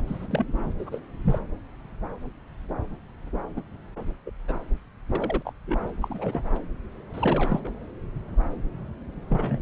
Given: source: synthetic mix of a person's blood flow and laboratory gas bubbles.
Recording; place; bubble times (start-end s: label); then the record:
Doppler ultrasound of blood flow; subclavian vein
0.00-0.03 s: bubbles
0.07-0.28 s: bubbles
0.30-0.47 s: bubbles
0.64-0.73 s: bubbles
0.78-1.00 s: bubbles
1.25-1.39 s: bubbles
3.56-3.61 s: bubbles
4.25-4.31 s: bubbles
4.48-4.53 s: bubbles
5.13-5.53 s: bubbles
5.66-5.79 s: bubbles
6.00-6.43 s: bubbles
7.14-7.60 s: bubbles
7.64-7.71 s: bubbles
9.29-9.62 s: bubbles
From the record:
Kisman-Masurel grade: 232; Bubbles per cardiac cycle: several, 3 to 8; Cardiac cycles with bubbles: 50 to 99%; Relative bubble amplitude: moderate (0.250 to 0.450); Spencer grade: 3 (all of the cardiac periods contain showers or single bubble signals, but not dominating or overriding the cardiac motion signals); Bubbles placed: anywhere in the cardiac cycle